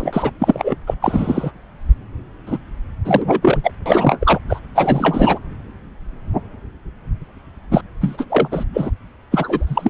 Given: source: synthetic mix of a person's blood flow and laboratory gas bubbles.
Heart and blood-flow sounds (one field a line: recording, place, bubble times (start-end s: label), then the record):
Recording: Doppler ultrasound of blood flow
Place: subclavian vein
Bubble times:
0.00-0.31 s: bubbles
0.39-0.76 s: bubbles
0.87-0.94 s: bubbles
1.01-1.51 s: bubbles
2.47-2.58 s: bubbles
3.04-3.71 s: bubbles
3.85-4.39 s: bubbles
4.49-4.60 s: bubbles
4.75-5.39 s: bubbles
7.71-7.81 s: bubbles
8.01-8.25 s: bubbles
8.29-8.48 s: bubbles
8.51-8.64 s: bubbles
8.73-8.90 s: bubbles
9.31-9.90 s: bubbles
From the record:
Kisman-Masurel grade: 333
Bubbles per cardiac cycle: rolling drumbeat, 9 or more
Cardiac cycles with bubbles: 50 to 99%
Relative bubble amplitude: loud (0.450 to 0.775)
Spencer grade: 3 (all of the cardiac periods contain showers or single bubble signals, but not dominating or overriding the cardiac motion signals)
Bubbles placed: anywhere in the cardiac cycle